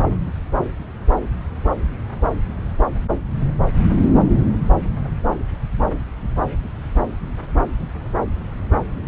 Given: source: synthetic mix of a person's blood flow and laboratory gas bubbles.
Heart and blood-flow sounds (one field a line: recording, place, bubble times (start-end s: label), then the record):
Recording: Doppler ultrasound of blood flow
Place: subclavian vein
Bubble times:
no bubbles
From the record:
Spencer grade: 0 (complete lack of bubble signals)